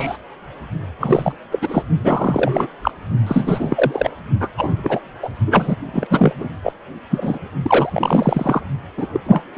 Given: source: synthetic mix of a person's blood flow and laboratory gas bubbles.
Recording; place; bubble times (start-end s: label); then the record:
Doppler ultrasound of blood flow; precordium
0.00-0.17 s: bubbles
0.98-1.33 s: bubbles
1.51-1.85 s: bubbles
2.03-2.67 s: bubbles
2.81-2.91 s: bubbles
3.26-4.11 s: bubbles
4.40-4.49 s: bubbles
4.57-4.69 s: bubbles
4.78-5.00 s: bubbles
5.23-5.29 s: bubbles
5.46-5.76 s: bubbles
5.93-6.07 s: bubbles
6.10-6.33 s: bubbles
6.38-6.48 s: bubbles
6.63-6.73 s: bubbles
7.10-7.38 s: bubbles
7.63-8.61 s: bubbles
8.97-9.07 s: bubbles
9.12-9.21 s: bubbles
9.26-9.43 s: bubbles
9.55-9.58 s: bubbles
From the record:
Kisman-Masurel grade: 343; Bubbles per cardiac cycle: rolling drumbeat, 9 or more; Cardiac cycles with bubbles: 100%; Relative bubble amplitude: loud (0.450 to 0.775); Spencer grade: 3 (all of the cardiac periods contain showers or single bubble signals, but not dominating or overriding the cardiac motion signals); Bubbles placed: only in the low amplitude regions of the cardiac cycle